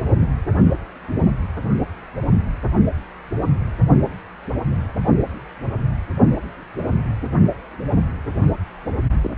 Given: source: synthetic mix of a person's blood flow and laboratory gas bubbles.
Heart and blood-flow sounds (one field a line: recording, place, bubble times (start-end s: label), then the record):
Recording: Doppler ultrasound of blood flow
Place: precordium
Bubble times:
9.23-9.30 s: bubbles
From the record:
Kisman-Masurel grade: 113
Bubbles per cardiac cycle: 1 to 2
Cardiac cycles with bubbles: 1 to 10%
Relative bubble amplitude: loud (0.450 to 0.775)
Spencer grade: 1 (occasional bubble signal discernible with the cardiac motion signal, with majority of cardiac periods free of bubbles)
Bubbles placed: anywhere in the cardiac cycle